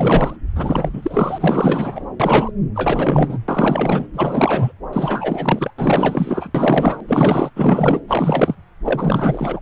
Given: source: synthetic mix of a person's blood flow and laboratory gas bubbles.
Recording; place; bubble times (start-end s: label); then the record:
Doppler ultrasound of blood flow; subclavian vein
0.00-0.36 s: bubbles
0.56-2.05 s: bubbles
2.20-2.52 s: bubbles
2.75-3.39 s: bubbles
3.48-4.06 s: bubbles
4.13-4.72 s: bubbles
4.92-5.71 s: bubbles
5.78-6.50 s: bubbles
6.54-7.00 s: bubbles
7.08-7.50 s: bubbles
7.55-8.01 s: bubbles
8.07-8.55 s: bubbles
8.85-9.60 s: bubbles
From the record:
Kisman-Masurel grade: 444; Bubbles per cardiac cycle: continuous sound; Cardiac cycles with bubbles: 100%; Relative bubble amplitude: maximal (0.775 to 0.999); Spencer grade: 4 (maximum detectable bubble signal sounding continuously throughout systole and diastole of every cardiac period, and overriding the amplitude of the normal cardiac signals); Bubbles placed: anywhere in the cardiac cycle